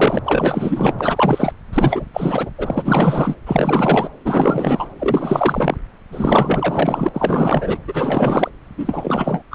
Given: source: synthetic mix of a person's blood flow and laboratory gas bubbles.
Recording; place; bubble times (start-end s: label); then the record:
Doppler ultrasound of blood flow; subclavian vein
0.00-0.19 s: bubbles
0.25-0.94 s: bubbles
0.99-1.53 s: bubbles
1.73-2.06 s: bubbles
2.13-2.50 s: bubbles
2.58-3.35 s: bubbles
3.46-4.09 s: bubbles
4.25-4.88 s: bubbles
4.99-5.76 s: bubbles
6.12-7.09 s: bubbles
7.13-7.78 s: bubbles
7.88-8.50 s: bubbles
8.78-9.42 s: bubbles
9.51-9.55 s: bubbles
From the record:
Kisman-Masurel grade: 444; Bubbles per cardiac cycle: continuous sound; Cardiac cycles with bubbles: 100%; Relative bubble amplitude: maximal (0.775 to 0.999); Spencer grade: 4 (maximum detectable bubble signal sounding continuously throughout systole and diastole of every cardiac period, and overriding the amplitude of the normal cardiac signals); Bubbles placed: anywhere in the cardiac cycle